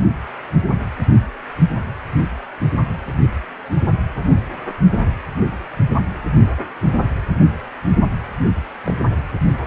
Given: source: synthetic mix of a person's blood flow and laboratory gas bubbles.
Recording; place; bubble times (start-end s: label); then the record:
Doppler ultrasound of blood flow; precordium
8.84-8.95 s: bubbles
From the record:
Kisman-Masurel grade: 112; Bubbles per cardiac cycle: 1 to 2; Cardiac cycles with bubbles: 1 to 10%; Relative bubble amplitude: moderate (0.250 to 0.450); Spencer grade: 1 (occasional bubble signal discernible with the cardiac motion signal, with majority of cardiac periods free of bubbles); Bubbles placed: only in the low amplitude regions of the cardiac cycle